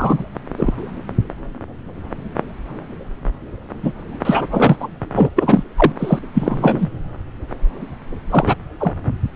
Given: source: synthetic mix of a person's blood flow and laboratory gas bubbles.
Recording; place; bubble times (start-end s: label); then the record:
Doppler ultrasound of blood flow; subclavian vein
0.00-0.24 s: bubbles
0.58-0.74 s: bubbles
3.82-3.92 s: bubbles
4.25-4.46 s: bubbles
4.50-4.76 s: bubbles
4.79-4.88 s: bubbles
5.13-5.29 s: bubbles
5.35-5.63 s: bubbles
5.76-5.92 s: bubbles
5.98-6.19 s: bubbles
6.33-6.89 s: bubbles
8.29-8.55 s: bubbles
8.80-8.94 s: bubbles
From the record:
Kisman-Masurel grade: 233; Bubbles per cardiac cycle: several, 3 to 8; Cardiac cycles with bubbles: 50 to 99%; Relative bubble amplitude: loud (0.450 to 0.775); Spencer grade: 3 (all of the cardiac periods contain showers or single bubble signals, but not dominating or overriding the cardiac motion signals); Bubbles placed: anywhere in the cardiac cycle